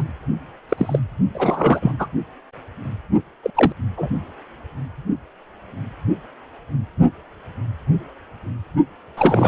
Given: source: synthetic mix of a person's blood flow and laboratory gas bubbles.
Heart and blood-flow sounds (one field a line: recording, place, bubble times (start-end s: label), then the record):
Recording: Doppler ultrasound of blood flow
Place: precordium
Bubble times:
0.00-0.04 s: bubbles
0.69-0.99 s: bubbles
1.34-1.92 s: bubbles
1.99-2.08 s: bubbles
3.42-3.50 s: bubbles
3.54-3.72 s: bubbles
3.97-4.09 s: bubbles
9.17-9.48 s: bubbles
From the record:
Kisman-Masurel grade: 222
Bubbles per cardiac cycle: several, 3 to 8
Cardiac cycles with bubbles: 10 to 50%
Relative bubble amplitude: moderate (0.250 to 0.450)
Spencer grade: 2 (many but less than half of the cardiac periods contain bubble signals, singularly or in groups)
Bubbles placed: only in the low amplitude regions of the cardiac cycle